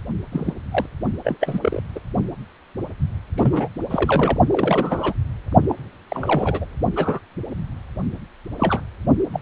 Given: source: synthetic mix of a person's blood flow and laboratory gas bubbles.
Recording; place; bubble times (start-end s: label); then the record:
Doppler ultrasound of blood flow; precordium
0.32-0.53 s: bubbles
0.71-0.86 s: bubbles
1.24-1.37 s: bubbles
1.41-1.59 s: bubbles
1.61-1.81 s: bubbles
1.95-1.99 s: bubbles
3.36-3.67 s: bubbles
3.90-4.38 s: bubbles
4.48-5.14 s: bubbles
5.69-5.75 s: bubbles
6.08-6.65 s: bubbles
6.96-7.20 s: bubbles
8.58-8.81 s: bubbles
9.32-9.40 s: bubbles
From the record:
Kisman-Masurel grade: 232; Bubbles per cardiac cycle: several, 3 to 8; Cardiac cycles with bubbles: 50 to 99%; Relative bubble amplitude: moderate (0.250 to 0.450); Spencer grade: 3 (all of the cardiac periods contain showers or single bubble signals, but not dominating or overriding the cardiac motion signals); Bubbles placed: only in the low amplitude regions of the cardiac cycle